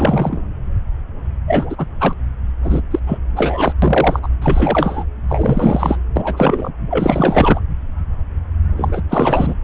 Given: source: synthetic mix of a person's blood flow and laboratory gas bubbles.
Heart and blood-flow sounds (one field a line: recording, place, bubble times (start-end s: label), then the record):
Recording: Doppler ultrasound of blood flow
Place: subclavian vein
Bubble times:
0.00-0.41 s: bubbles
1.47-1.86 s: bubbles
2.00-2.13 s: bubbles
2.62-2.81 s: bubbles
2.90-2.99 s: bubbles
3.06-3.18 s: bubbles
3.36-3.73 s: bubbles
3.82-4.20 s: bubbles
4.22-4.28 s: bubbles
4.42-5.04 s: bubbles
5.29-5.97 s: bubbles
6.16-6.71 s: bubbles
6.90-7.59 s: bubbles
8.77-9.02 s: bubbles
9.09-9.54 s: bubbles
From the record:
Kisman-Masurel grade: 333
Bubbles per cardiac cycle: rolling drumbeat, 9 or more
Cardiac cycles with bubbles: 50 to 99%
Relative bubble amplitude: loud (0.450 to 0.775)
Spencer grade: 3 (all of the cardiac periods contain showers or single bubble signals, but not dominating or overriding the cardiac motion signals)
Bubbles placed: anywhere in the cardiac cycle